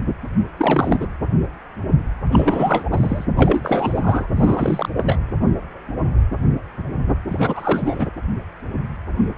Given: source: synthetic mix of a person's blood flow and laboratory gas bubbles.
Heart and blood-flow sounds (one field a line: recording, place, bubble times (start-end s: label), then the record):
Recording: Doppler ultrasound of blood flow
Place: precordium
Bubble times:
0.57-1.06 s: bubbles
2.31-2.84 s: bubbles
2.91-3.25 s: bubbles
3.37-4.28 s: bubbles
4.36-4.89 s: bubbles
4.97-5.19 s: bubbles
7.27-8.07 s: bubbles
From the record:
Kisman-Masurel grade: 333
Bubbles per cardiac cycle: rolling drumbeat, 9 or more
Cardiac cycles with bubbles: 50 to 99%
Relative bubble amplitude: loud (0.450 to 0.775)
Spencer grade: 3 (all of the cardiac periods contain showers or single bubble signals, but not dominating or overriding the cardiac motion signals)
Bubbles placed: anywhere in the cardiac cycle